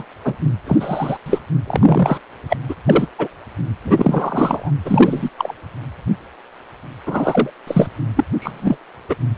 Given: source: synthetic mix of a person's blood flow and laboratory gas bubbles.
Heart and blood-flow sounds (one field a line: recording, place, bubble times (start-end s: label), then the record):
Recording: Doppler ultrasound of blood flow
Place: precordium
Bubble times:
0.00-0.03 s: bubbles
0.23-0.34 s: bubbles
0.66-1.18 s: bubbles
1.26-1.40 s: bubbles
1.67-2.19 s: bubbles
2.49-2.57 s: bubbles
2.69-2.75 s: bubbles
2.86-3.06 s: bubbles
3.18-3.27 s: bubbles
3.84-4.71 s: bubbles
4.85-5.29 s: bubbles
5.38-5.54 s: bubbles
7.06-7.50 s: bubbles
7.67-7.87 s: bubbles
8.16-8.25 s: bubbles
8.39-8.77 s: bubbles
9.09-9.16 s: bubbles
From the record:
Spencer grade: 3 (all of the cardiac periods contain showers or single bubble signals, but not dominating or overriding the cardiac motion signals)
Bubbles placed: anywhere in the cardiac cycle